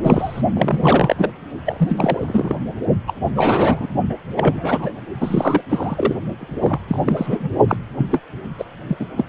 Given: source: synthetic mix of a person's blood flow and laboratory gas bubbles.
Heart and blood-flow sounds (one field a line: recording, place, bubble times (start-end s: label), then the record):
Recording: Doppler ultrasound of blood flow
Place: precordium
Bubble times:
0.02-0.42 s: bubbles
0.54-1.15 s: bubbles
1.18-1.31 s: bubbles
1.66-2.56 s: bubbles
3.07-3.13 s: bubbles
3.35-3.87 s: bubbles
4.09-4.16 s: bubbles
4.36-5.01 s: bubbles
5.20-5.62 s: bubbles
5.69-6.15 s: bubbles
6.40-6.80 s: bubbles
6.88-7.48 s: bubbles
7.68-7.77 s: bubbles
7.97-8.07 s: bubbles
8.12-8.21 s: bubbles
8.58-8.65 s: bubbles
8.88-9.06 s: bubbles
9.17-9.24 s: bubbles
From the record:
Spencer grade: 3 (all of the cardiac periods contain showers or single bubble signals, but not dominating or overriding the cardiac motion signals)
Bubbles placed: only in the low amplitude regions of the cardiac cycle